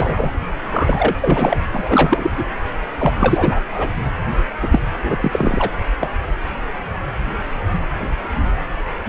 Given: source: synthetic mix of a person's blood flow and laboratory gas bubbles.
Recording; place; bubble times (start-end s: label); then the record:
Doppler ultrasound of blood flow; precordium
0.00-0.32 s: bubbles
0.63-1.15 s: bubbles
1.21-1.57 s: bubbles
1.73-2.31 s: bubbles
2.37-2.44 s: bubbles
2.98-3.12 s: bubbles
3.19-3.60 s: bubbles
3.75-3.89 s: bubbles
4.61-4.68 s: bubbles
4.71-4.79 s: bubbles
5.02-5.17 s: bubbles
5.20-5.71 s: bubbles
6.00-6.13 s: bubbles
From the record:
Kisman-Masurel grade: 333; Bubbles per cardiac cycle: rolling drumbeat, 9 or more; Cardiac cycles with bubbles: 50 to 99%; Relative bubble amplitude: loud (0.450 to 0.775); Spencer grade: 3 (all of the cardiac periods contain showers or single bubble signals, but not dominating or overriding the cardiac motion signals); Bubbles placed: anywhere in the cardiac cycle